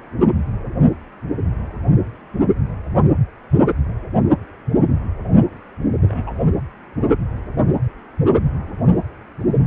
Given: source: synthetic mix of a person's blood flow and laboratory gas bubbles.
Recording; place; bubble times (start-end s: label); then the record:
Doppler ultrasound of blood flow; precordium
6.02-6.31 s: bubbles
From the record:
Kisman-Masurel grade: 111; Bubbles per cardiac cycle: 1 to 2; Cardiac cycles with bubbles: 1 to 10%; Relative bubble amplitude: barely perceptible (0.100 to 0.250); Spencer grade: 1 (occasional bubble signal discernible with the cardiac motion signal, with majority of cardiac periods free of bubbles); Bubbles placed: only in the low amplitude regions of the cardiac cycle